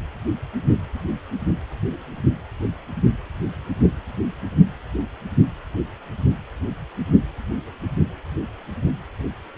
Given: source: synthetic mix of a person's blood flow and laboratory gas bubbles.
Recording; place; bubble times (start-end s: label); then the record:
Doppler ultrasound of blood flow; precordium
no bubbles
From the record:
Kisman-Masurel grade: 000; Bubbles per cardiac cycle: 0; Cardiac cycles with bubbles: 0%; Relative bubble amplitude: no bubbles discernible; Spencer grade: 0 (complete lack of bubble signals)